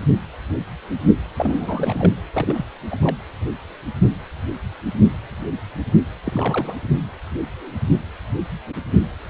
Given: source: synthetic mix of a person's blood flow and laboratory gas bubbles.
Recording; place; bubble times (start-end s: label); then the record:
Doppler ultrasound of blood flow; precordium
1.36-2.11 s: bubbles
2.33-2.65 s: bubbles
2.90-2.97 s: bubbles
3.01-3.15 s: bubbles
6.24-6.76 s: bubbles
From the record:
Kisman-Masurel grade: 222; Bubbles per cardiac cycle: several, 3 to 8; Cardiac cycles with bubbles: 10 to 50%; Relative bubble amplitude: moderate (0.250 to 0.450); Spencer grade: 2 (many but less than half of the cardiac periods contain bubble signals, singularly or in groups); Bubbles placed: anywhere in the cardiac cycle